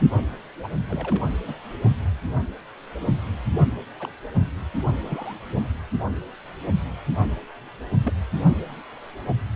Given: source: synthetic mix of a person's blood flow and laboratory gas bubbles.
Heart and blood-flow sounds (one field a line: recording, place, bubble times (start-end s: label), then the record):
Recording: Doppler ultrasound of blood flow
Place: precordium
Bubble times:
0.62-0.72 s: bubbles
0.88-1.25 s: bubbles
1.47-1.53 s: bubbles
3.99-4.12 s: bubbles
5.03-5.34 s: bubbles
8.04-8.12 s: bubbles
From the record:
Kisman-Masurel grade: 121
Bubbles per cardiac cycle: 1 to 2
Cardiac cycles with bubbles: 10 to 50%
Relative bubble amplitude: barely perceptible (0.100 to 0.250)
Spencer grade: 2 (many but less than half of the cardiac periods contain bubble signals, singularly or in groups)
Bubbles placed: anywhere in the cardiac cycle